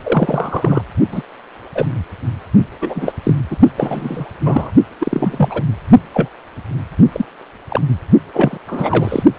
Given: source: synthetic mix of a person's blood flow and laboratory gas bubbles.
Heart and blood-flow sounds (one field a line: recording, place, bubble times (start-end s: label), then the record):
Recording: Doppler ultrasound of blood flow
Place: precordium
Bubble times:
0.03-0.81 s: bubbles
1.11-1.23 s: bubbles
1.75-1.85 s: bubbles
2.81-3.12 s: bubbles
3.23-3.33 s: bubbles
3.50-3.57 s: bubbles
3.77-4.26 s: bubbles
4.44-4.71 s: bubbles
5.00-5.62 s: bubbles
6.14-6.29 s: bubbles
7.12-7.25 s: bubbles
7.70-7.81 s: bubbles
8.33-8.57 s: bubbles
8.67-9.23 s: bubbles
From the record:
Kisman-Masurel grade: 243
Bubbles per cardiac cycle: several, 3 to 8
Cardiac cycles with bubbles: 100%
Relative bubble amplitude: loud (0.450 to 0.775)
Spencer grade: 3 (all of the cardiac periods contain showers or single bubble signals, but not dominating or overriding the cardiac motion signals)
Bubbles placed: only in the low amplitude regions of the cardiac cycle